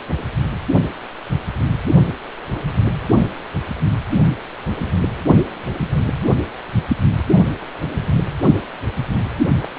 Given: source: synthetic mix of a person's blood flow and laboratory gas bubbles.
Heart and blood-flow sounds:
Doppler ultrasound of blood flow; precordium
9.61-9.71 s: bubbles
From the record:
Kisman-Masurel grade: 211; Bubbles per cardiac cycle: several, 3 to 8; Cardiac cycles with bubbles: 1 to 10%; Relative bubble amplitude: barely perceptible (0.100 to 0.250); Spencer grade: 1 (occasional bubble signal discernible with the cardiac motion signal, with majority of cardiac periods free of bubbles); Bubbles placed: anywhere in the cardiac cycle

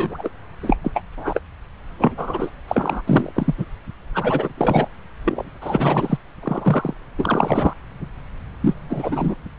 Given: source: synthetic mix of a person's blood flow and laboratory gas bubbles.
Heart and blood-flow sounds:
Doppler ultrasound of blood flow; subclavian vein
0.00-0.29 s: bubbles
0.63-0.77 s: bubbles
0.83-0.91 s: bubbles
0.94-1.01 s: bubbles
1.18-1.40 s: bubbles
1.98-2.51 s: bubbles
2.67-3.02 s: bubbles
3.07-3.31 s: bubbles
3.34-3.54 s: bubbles
3.57-3.65 s: bubbles
4.15-4.53 s: bubbles
4.57-4.88 s: bubbles
5.25-5.50 s: bubbles
5.61-6.17 s: bubbles
6.43-6.95 s: bubbles
7.18-7.74 s: bubbles
8.60-8.74 s: bubbles
8.89-9.35 s: bubbles
From the record:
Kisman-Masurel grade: 332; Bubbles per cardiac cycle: rolling drumbeat, 9 or more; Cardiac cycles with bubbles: 50 to 99%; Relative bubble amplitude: moderate (0.250 to 0.450); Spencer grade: 3 (all of the cardiac periods contain showers or single bubble signals, but not dominating or overriding the cardiac motion signals); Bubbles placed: anywhere in the cardiac cycle

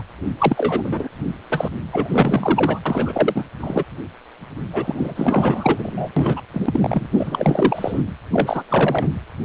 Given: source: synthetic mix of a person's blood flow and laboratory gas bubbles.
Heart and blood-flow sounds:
Doppler ultrasound of blood flow; precordium
0.00-0.03 s: bubbles
0.38-1.09 s: bubbles
1.49-1.68 s: bubbles
1.92-2.81 s: bubbles
2.85-3.45 s: bubbles
3.60-3.84 s: bubbles
4.73-6.09 s: bubbles
6.16-6.42 s: bubbles
6.53-7.07 s: bubbles
7.12-8.02 s: bubbles
8.33-8.63 s: bubbles
8.68-9.09 s: bubbles
From the record:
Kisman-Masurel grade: 343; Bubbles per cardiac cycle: rolling drumbeat, 9 or more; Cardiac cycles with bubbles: 100%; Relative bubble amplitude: loud (0.450 to 0.775); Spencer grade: 3 (all of the cardiac periods contain showers or single bubble signals, but not dominating or overriding the cardiac motion signals); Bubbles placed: anywhere in the cardiac cycle

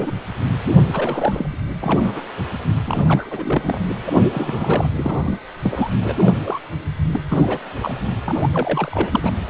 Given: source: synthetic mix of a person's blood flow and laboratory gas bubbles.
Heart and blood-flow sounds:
Doppler ultrasound of blood flow; precordium
0.00-0.12 s: bubbles
0.92-1.58 s: bubbles
1.81-2.00 s: bubbles
2.03-2.21 s: bubbles
2.86-3.78 s: bubbles
4.07-4.16 s: bubbles
4.33-4.89 s: bubbles
4.95-5.39 s: bubbles
5.62-5.88 s: bubbles
6.03-6.34 s: bubbles
6.44-6.59 s: bubbles
7.11-7.20 s: bubbles
7.29-7.58 s: bubbles
7.81-7.94 s: bubbles
8.25-9.30 s: bubbles
From the record:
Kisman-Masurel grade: 232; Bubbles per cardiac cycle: several, 3 to 8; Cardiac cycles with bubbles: 50 to 99%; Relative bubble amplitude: moderate (0.250 to 0.450); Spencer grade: 3 (all of the cardiac periods contain showers or single bubble signals, but not dominating or overriding the cardiac motion signals); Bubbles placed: anywhere in the cardiac cycle

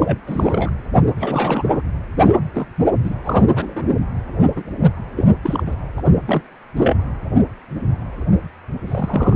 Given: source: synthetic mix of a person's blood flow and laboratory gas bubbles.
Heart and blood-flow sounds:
Doppler ultrasound of blood flow; precordium
0.00-0.19 s: bubbles
0.27-0.71 s: bubbles
1.17-1.82 s: bubbles
2.20-2.33 s: bubbles
2.54-2.65 s: bubbles
2.87-2.91 s: bubbles
3.04-3.13 s: bubbles
3.24-3.45 s: bubbles
3.55-3.93 s: bubbles
4.56-4.63 s: bubbles
4.81-4.90 s: bubbles
5.17-5.25 s: bubbles
5.43-5.64 s: bubbles
5.67-5.76 s: bubbles
5.97-6.02 s: bubbles
6.25-6.44 s: bubbles
6.76-6.97 s: bubbles
8.87-9.36 s: bubbles
From the record:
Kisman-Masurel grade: 232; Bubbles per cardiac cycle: several, 3 to 8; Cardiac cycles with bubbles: 50 to 99%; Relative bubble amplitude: moderate (0.250 to 0.450); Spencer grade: 3 (all of the cardiac periods contain showers or single bubble signals, but not dominating or overriding the cardiac motion signals); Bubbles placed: anywhere in the cardiac cycle

